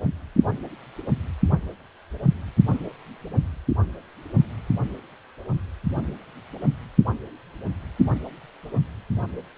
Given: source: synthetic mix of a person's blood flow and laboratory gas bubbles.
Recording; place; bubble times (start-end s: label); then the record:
Doppler ultrasound of blood flow; precordium
no bubbles
From the record:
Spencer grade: 0 (complete lack of bubble signals)